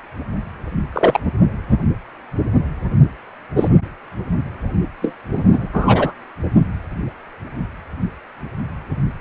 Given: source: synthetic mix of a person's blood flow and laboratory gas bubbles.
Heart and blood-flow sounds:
Doppler ultrasound of blood flow; precordium
0.93-1.20 s: bubbles
3.56-3.69 s: bubbles
5.02-5.14 s: bubbles
5.35-5.68 s: bubbles
5.73-6.12 s: bubbles
From the record:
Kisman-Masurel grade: 123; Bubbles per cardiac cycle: 1 to 2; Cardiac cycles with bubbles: 10 to 50%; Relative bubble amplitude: loud (0.450 to 0.775); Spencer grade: 2 (many but less than half of the cardiac periods contain bubble signals, singularly or in groups); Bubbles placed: anywhere in the cardiac cycle

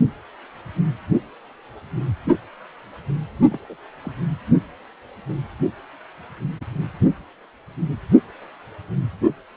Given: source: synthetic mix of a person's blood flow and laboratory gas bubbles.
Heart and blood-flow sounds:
Doppler ultrasound of blood flow; precordium
3.50-3.59 s: bubbles
3.64-3.76 s: bubbles
4.03-4.12 s: bubbles
From the record:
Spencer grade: 1 (occasional bubble signal discernible with the cardiac motion signal, with majority of cardiac periods free of bubbles); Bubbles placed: only in the low amplitude regions of the cardiac cycle

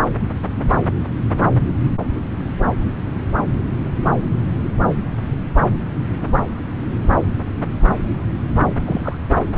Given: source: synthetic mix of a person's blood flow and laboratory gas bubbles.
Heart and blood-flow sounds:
Doppler ultrasound of blood flow; subclavian vein
8.85-9.18 s: bubbles
From the record:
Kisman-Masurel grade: 212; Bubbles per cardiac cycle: several, 3 to 8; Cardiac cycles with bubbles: 1 to 10%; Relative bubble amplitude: moderate (0.250 to 0.450); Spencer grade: 1 (occasional bubble signal discernible with the cardiac motion signal, with majority of cardiac periods free of bubbles); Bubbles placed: anywhere in the cardiac cycle

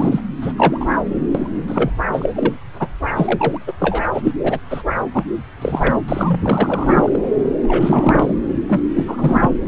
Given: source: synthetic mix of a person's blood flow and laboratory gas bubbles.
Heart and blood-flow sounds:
Doppler ultrasound of blood flow; subclavian vein
0.00-0.20 s: bubbles
0.41-0.53 s: bubbles
0.58-0.86 s: bubbles
0.90-0.98 s: bubbles
1.34-1.48 s: bubbles
1.68-1.90 s: bubbles
2.12-2.29 s: bubbles
2.35-2.54 s: bubbles
2.79-2.88 s: bubbles
3.16-3.58 s: bubbles
3.67-3.73 s: bubbles
3.78-4.07 s: bubbles
4.14-4.32 s: bubbles
4.42-4.58 s: bubbles
4.70-4.83 s: bubbles
5.14-5.24 s: bubbles
5.61-5.95 s: bubbles
6.08-6.41 s: bubbles
6.44-7.09 s: bubbles
7.12-7.20 s: bubbles
7.62-8.36 s: bubbles
8.69-8.81 s: bubbles
8.96-9.04 s: bubbles
9.06-9.52 s: bubbles
From the record:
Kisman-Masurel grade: 343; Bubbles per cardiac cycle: rolling drumbeat, 9 or more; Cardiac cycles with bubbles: 100%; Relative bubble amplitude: loud (0.450 to 0.775); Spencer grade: 3 (all of the cardiac periods contain showers or single bubble signals, but not dominating or overriding the cardiac motion signals); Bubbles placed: anywhere in the cardiac cycle

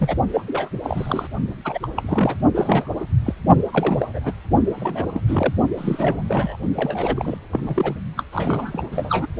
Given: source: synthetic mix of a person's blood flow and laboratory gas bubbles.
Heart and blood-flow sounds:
Doppler ultrasound of blood flow; precordium
0.00-0.16 s: bubbles
0.33-0.43 s: bubbles
0.47-0.69 s: bubbles
0.84-1.27 s: bubbles
1.65-1.79 s: bubbles
1.83-1.88 s: bubbles
1.97-2.37 s: bubbles
2.54-2.91 s: bubbles
3.00-3.06 s: bubbles
3.25-3.33 s: bubbles
3.72-4.33 s: bubbles
4.75-5.06 s: bubbles
5.13-5.22 s: bubbles
5.27-5.54 s: bubbles
5.77-6.22 s: bubbles
6.29-6.56 s: bubbles
6.75-7.37 s: bubbles
7.52-7.96 s: bubbles
8.17-8.23 s: bubbles
8.32-8.87 s: bubbles
8.92-9.27 s: bubbles
From the record:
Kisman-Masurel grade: 342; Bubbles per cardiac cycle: rolling drumbeat, 9 or more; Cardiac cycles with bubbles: 100%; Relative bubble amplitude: moderate (0.250 to 0.450); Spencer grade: 3 (all of the cardiac periods contain showers or single bubble signals, but not dominating or overriding the cardiac motion signals); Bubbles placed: only in the low amplitude regions of the cardiac cycle

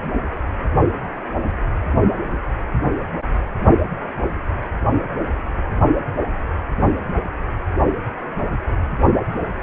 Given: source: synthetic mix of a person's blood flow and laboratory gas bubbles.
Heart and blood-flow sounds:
Doppler ultrasound of blood flow; precordium
no bubbles
From the record:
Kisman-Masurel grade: 000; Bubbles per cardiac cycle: 0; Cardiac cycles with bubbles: 0%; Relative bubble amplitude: no bubbles discernible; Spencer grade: 0 (complete lack of bubble signals)

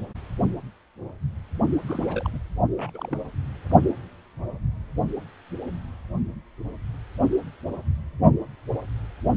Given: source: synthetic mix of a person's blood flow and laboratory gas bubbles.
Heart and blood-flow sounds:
Doppler ultrasound of blood flow; precordium
1.82-2.39 s: bubbles
2.77-2.91 s: bubbles
2.94-3.16 s: bubbles
From the record:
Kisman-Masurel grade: 221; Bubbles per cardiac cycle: several, 3 to 8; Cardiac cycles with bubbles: 10 to 50%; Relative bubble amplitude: barely perceptible (0.100 to 0.250); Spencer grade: 2 (many but less than half of the cardiac periods contain bubble signals, singularly or in groups); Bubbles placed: only in the low amplitude regions of the cardiac cycle

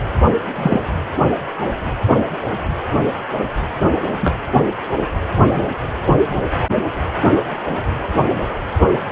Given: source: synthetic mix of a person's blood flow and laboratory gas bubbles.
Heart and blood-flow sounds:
Doppler ultrasound of blood flow; precordium
0.54-0.97 s: bubbles
4.21-4.36 s: bubbles
5.50-5.61 s: bubbles
8.91-8.99 s: bubbles
From the record:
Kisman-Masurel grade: 123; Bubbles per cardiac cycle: 1 to 2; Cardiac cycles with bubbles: 10 to 50%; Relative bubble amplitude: loud (0.450 to 0.775); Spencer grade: 2 (many but less than half of the cardiac periods contain bubble signals, singularly or in groups); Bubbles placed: anywhere in the cardiac cycle

